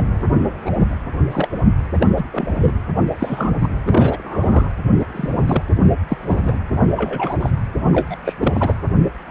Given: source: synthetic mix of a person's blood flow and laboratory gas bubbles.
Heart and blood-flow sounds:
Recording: Doppler ultrasound of blood flow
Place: precordium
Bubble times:
0.00-0.02 s: bubbles
0.65-0.72 s: bubbles
1.31-1.49 s: bubbles
2.00-2.07 s: bubbles
2.17-2.26 s: bubbles
2.33-2.73 s: bubbles
3.20-3.55 s: bubbles
3.59-3.68 s: bubbles
3.85-4.74 s: bubbles
4.99-5.06 s: bubbles
5.13-5.62 s: bubbles
6.08-6.17 s: bubbles
6.21-6.58 s: bubbles
6.96-7.37 s: bubbles
7.40-7.50 s: bubbles
7.91-8.16 s: bubbles
8.25-8.34 s: bubbles
8.39-8.75 s: bubbles
From the record:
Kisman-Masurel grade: 232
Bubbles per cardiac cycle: several, 3 to 8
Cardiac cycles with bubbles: 50 to 99%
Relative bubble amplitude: moderate (0.250 to 0.450)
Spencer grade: 3 (all of the cardiac periods contain showers or single bubble signals, but not dominating or overriding the cardiac motion signals)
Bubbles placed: anywhere in the cardiac cycle

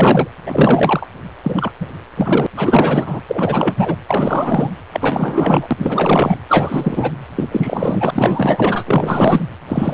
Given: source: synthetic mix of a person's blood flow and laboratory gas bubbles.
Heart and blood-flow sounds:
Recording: Doppler ultrasound of blood flow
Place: precordium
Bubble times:
0.00-0.28 s: bubbles
0.46-1.07 s: bubbles
1.44-1.72 s: bubbles
1.80-1.88 s: bubbles
2.17-2.46 s: bubbles
2.56-3.20 s: bubbles
3.27-3.96 s: bubbles
4.08-4.71 s: bubbles
4.92-6.37 s: bubbles
6.48-7.12 s: bubbles
7.36-7.49 s: bubbles
7.51-8.83 s: bubbles
8.86-9.43 s: bubbles
9.68-9.94 s: bubbles
From the record:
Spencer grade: 4 (maximum detectable bubble signal sounding continuously throughout systole and diastole of every cardiac period, and overriding the amplitude of the normal cardiac signals)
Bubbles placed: anywhere in the cardiac cycle

